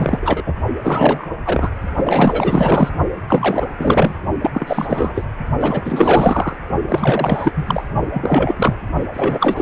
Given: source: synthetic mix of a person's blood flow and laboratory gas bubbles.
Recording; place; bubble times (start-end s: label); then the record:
Doppler ultrasound of blood flow; precordium
0.00-0.43 s: bubbles
0.46-0.54 s: bubbles
0.84-1.27 s: bubbles
1.45-1.70 s: bubbles
1.97-2.90 s: bubbles
3.27-3.67 s: bubbles
3.77-4.15 s: bubbles
4.42-4.51 s: bubbles
4.54-5.25 s: bubbles
5.60-6.58 s: bubbles
6.89-7.53 s: bubbles
7.55-7.84 s: bubbles
8.10-8.77 s: bubbles
9.13-9.61 s: bubbles
From the record:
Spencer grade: 4 (maximum detectable bubble signal sounding continuously throughout systole and diastole of every cardiac period, and overriding the amplitude of the normal cardiac signals); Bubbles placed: only in the low amplitude regions of the cardiac cycle